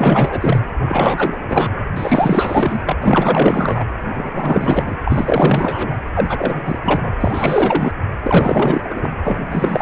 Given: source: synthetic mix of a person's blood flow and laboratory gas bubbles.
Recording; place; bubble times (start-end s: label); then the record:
Doppler ultrasound of blood flow; precordium
0.00-0.59 s: bubbles
0.79-1.81 s: bubbles
1.92-2.82 s: bubbles
2.86-2.96 s: bubbles
3.01-3.85 s: bubbles
4.08-4.97 s: bubbles
5.04-6.03 s: bubbles
6.14-6.79 s: bubbles
6.82-7.14 s: bubbles
7.20-7.92 s: bubbles
8.22-9.11 s: bubbles
9.24-9.39 s: bubbles
9.50-9.82 s: bubbles
From the record:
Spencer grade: 4 (maximum detectable bubble signal sounding continuously throughout systole and diastole of every cardiac period, and overriding the amplitude of the normal cardiac signals); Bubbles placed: anywhere in the cardiac cycle